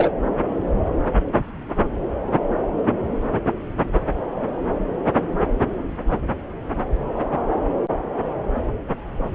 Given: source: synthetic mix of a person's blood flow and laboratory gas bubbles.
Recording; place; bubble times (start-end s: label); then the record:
Doppler ultrasound of blood flow; subclavian vein
0.00-0.10 s: bubbles
From the record:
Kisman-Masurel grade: 213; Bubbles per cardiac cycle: several, 3 to 8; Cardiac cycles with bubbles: 1 to 10%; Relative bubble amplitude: loud (0.450 to 0.775); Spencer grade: 1 (occasional bubble signal discernible with the cardiac motion signal, with majority of cardiac periods free of bubbles); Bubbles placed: anywhere in the cardiac cycle